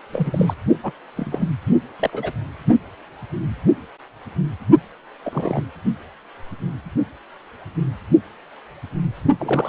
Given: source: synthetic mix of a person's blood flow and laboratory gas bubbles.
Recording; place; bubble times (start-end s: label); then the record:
Doppler ultrasound of blood flow; precordium
0.12-0.54 s: bubbles
0.83-0.92 s: bubbles
1.17-1.51 s: bubbles
1.99-2.32 s: bubbles
5.23-5.65 s: bubbles
9.38-9.69 s: bubbles
From the record:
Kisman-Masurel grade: 232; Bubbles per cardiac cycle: several, 3 to 8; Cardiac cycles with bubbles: 50 to 99%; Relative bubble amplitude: moderate (0.250 to 0.450); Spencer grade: 3 (all of the cardiac periods contain showers or single bubble signals, but not dominating or overriding the cardiac motion signals); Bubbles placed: only in the low amplitude regions of the cardiac cycle